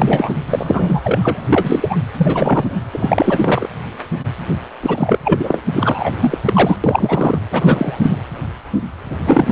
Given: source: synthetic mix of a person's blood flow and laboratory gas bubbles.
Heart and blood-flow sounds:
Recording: Doppler ultrasound of blood flow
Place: precordium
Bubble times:
0.00-0.39 s: bubbles
0.46-1.46 s: bubbles
1.48-1.98 s: bubbles
2.18-2.65 s: bubbles
2.93-3.67 s: bubbles
4.82-5.18 s: bubbles
5.24-5.62 s: bubbles
5.73-6.10 s: bubbles
6.21-6.38 s: bubbles
6.45-6.76 s: bubbles
6.83-7.38 s: bubbles
7.51-8.18 s: bubbles
9.09-9.52 s: bubbles
From the record:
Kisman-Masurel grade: 333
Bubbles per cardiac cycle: rolling drumbeat, 9 or more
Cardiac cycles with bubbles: 50 to 99%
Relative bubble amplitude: loud (0.450 to 0.775)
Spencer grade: 3 (all of the cardiac periods contain showers or single bubble signals, but not dominating or overriding the cardiac motion signals)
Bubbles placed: anywhere in the cardiac cycle

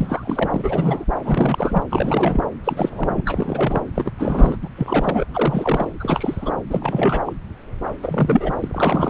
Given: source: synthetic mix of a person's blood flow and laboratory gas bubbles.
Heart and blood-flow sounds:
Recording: Doppler ultrasound of blood flow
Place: subclavian vein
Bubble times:
0.00-1.05 s: bubbles
1.24-1.82 s: bubbles
1.90-2.43 s: bubbles
2.64-3.23 s: bubbles
3.25-3.79 s: bubbles
3.95-4.12 s: bubbles
4.18-4.56 s: bubbles
4.62-4.69 s: bubbles
4.76-5.25 s: bubbles
5.33-5.93 s: bubbles
6.00-6.52 s: bubbles
6.69-7.22 s: bubbles
7.25-7.33 s: bubbles
8.02-8.53 s: bubbles
8.60-9.09 s: bubbles
From the record:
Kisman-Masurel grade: 332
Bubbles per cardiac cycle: rolling drumbeat, 9 or more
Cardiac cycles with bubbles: 50 to 99%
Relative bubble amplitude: moderate (0.250 to 0.450)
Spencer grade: 3 (all of the cardiac periods contain showers or single bubble signals, but not dominating or overriding the cardiac motion signals)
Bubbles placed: anywhere in the cardiac cycle

